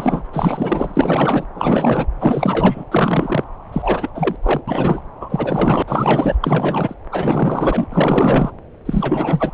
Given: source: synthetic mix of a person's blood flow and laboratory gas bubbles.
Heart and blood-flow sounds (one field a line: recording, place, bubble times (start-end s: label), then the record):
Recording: Doppler ultrasound of blood flow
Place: subclavian vein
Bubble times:
0.00-0.26 s: bubbles
0.32-1.45 s: bubbles
1.53-2.07 s: bubbles
2.20-2.83 s: bubbles
2.91-3.43 s: bubbles
3.72-4.10 s: bubbles
4.15-4.36 s: bubbles
4.42-4.61 s: bubbles
4.67-5.01 s: bubbles
5.20-5.83 s: bubbles
5.87-6.36 s: bubbles
6.41-6.95 s: bubbles
7.12-7.87 s: bubbles
7.92-8.52 s: bubbles
8.86-9.51 s: bubbles
From the record:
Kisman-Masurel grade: 444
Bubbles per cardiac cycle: continuous sound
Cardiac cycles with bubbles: 100%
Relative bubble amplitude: maximal (0.775 to 0.999)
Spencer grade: 4 (maximum detectable bubble signal sounding continuously throughout systole and diastole of every cardiac period, and overriding the amplitude of the normal cardiac signals)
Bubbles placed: anywhere in the cardiac cycle